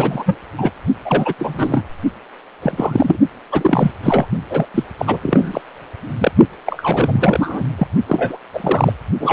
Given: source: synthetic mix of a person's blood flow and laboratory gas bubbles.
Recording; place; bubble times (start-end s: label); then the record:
Doppler ultrasound of blood flow; precordium
0.00-0.39 s: bubbles
0.57-0.70 s: bubbles
1.05-1.33 s: bubbles
1.39-1.85 s: bubbles
2.62-3.17 s: bubbles
3.52-3.91 s: bubbles
4.03-4.26 s: bubbles
4.49-4.66 s: bubbles
4.74-4.84 s: bubbles
4.98-5.18 s: bubbles
5.21-5.61 s: bubbles
6.19-6.31 s: bubbles
6.66-7.64 s: bubbles
7.78-7.87 s: bubbles
8.07-8.38 s: bubbles
8.53-8.94 s: bubbles
9.20-9.33 s: bubbles
From the record:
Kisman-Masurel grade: 343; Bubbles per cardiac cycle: rolling drumbeat, 9 or more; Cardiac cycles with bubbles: 100%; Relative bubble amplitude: loud (0.450 to 0.775); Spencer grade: 3 (all of the cardiac periods contain showers or single bubble signals, but not dominating or overriding the cardiac motion signals); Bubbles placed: only in the low amplitude regions of the cardiac cycle